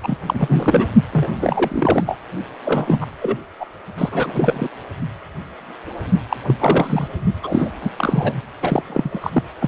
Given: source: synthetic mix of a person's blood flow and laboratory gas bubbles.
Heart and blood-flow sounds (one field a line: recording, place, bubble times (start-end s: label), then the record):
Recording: Doppler ultrasound of blood flow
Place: precordium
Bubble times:
0.02-0.18 s: bubbles
0.26-0.88 s: bubbles
1.11-2.18 s: bubbles
2.65-3.06 s: bubbles
3.21-3.38 s: bubbles
3.60-3.65 s: bubbles
3.98-4.68 s: bubbles
6.29-6.36 s: bubbles
6.46-7.08 s: bubbles
7.43-7.72 s: bubbles
7.81-7.90 s: bubbles
7.98-8.33 s: bubbles
8.61-8.83 s: bubbles
8.87-9.42 s: bubbles
9.61-9.68 s: bubbles
From the record:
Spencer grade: 3 (all of the cardiac periods contain showers or single bubble signals, but not dominating or overriding the cardiac motion signals)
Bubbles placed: only in the low amplitude regions of the cardiac cycle